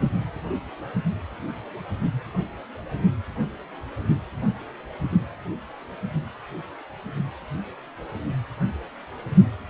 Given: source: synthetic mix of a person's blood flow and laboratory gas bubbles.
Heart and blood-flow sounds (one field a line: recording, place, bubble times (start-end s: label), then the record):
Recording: Doppler ultrasound of blood flow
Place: precordium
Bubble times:
no bubbles
From the record:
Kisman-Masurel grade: 000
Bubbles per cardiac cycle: 0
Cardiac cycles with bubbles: 0%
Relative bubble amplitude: no bubbles discernible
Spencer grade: 0 (complete lack of bubble signals)